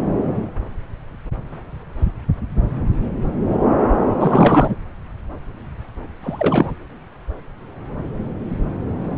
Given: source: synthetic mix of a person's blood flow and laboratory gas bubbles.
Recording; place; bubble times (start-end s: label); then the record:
Doppler ultrasound of blood flow; subclavian vein
4.20-4.75 s: bubbles
6.23-6.71 s: bubbles
From the record:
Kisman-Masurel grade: 223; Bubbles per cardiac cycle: several, 3 to 8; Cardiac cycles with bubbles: 10 to 50%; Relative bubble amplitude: loud (0.450 to 0.775); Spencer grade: 2 (many but less than half of the cardiac periods contain bubble signals, singularly or in groups); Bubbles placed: anywhere in the cardiac cycle